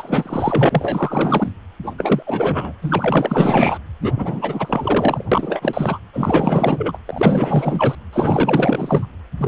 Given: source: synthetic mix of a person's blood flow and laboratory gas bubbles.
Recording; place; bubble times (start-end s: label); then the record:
Doppler ultrasound of blood flow; precordium
0.00-1.52 s: bubbles
1.82-1.94 s: bubbles
1.98-2.23 s: bubbles
2.26-2.74 s: bubbles
2.81-3.78 s: bubbles
4.01-4.13 s: bubbles
4.17-5.26 s: bubbles
5.32-5.99 s: bubbles
6.13-6.98 s: bubbles
7.06-7.95 s: bubbles
8.12-9.06 s: bubbles
9.38-9.47 s: bubbles
From the record:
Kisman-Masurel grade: 444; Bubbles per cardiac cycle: continuous sound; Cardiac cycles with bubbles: 100%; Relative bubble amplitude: maximal (0.775 to 0.999); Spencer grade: 4 (maximum detectable bubble signal sounding continuously throughout systole and diastole of every cardiac period, and overriding the amplitude of the normal cardiac signals); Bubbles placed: anywhere in the cardiac cycle